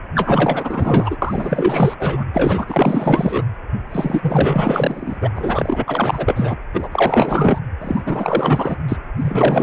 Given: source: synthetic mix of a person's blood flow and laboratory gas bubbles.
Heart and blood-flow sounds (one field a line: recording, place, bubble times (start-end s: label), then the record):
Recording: Doppler ultrasound of blood flow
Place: precordium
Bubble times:
0.14-1.17 s: bubbles
1.22-1.95 s: bubbles
1.99-2.24 s: bubbles
2.33-3.44 s: bubbles
3.89-5.29 s: bubbles
5.35-5.84 s: bubbles
5.88-6.57 s: bubbles
6.73-6.89 s: bubbles
6.92-7.59 s: bubbles
7.81-8.02 s: bubbles
8.05-8.76 s: bubbles
8.88-8.96 s: bubbles
9.19-9.63 s: bubbles
From the record:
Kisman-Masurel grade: 444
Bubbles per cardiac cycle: continuous sound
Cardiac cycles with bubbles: 100%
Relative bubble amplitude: maximal (0.775 to 0.999)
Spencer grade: 4 (maximum detectable bubble signal sounding continuously throughout systole and diastole of every cardiac period, and overriding the amplitude of the normal cardiac signals)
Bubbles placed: anywhere in the cardiac cycle